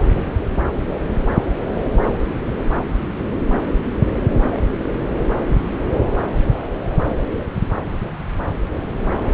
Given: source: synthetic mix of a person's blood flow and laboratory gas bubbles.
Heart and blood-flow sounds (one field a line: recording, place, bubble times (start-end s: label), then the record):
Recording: Doppler ultrasound of blood flow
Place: subclavian vein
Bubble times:
4.54-4.62 s: bubbles
4.83-4.93 s: bubbles
4.97-5.04 s: bubbles
From the record:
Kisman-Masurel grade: 211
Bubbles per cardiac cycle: several, 3 to 8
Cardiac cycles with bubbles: 1 to 10%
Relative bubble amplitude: barely perceptible (0.100 to 0.250)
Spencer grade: 1 (occasional bubble signal discernible with the cardiac motion signal, with majority of cardiac periods free of bubbles)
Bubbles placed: anywhere in the cardiac cycle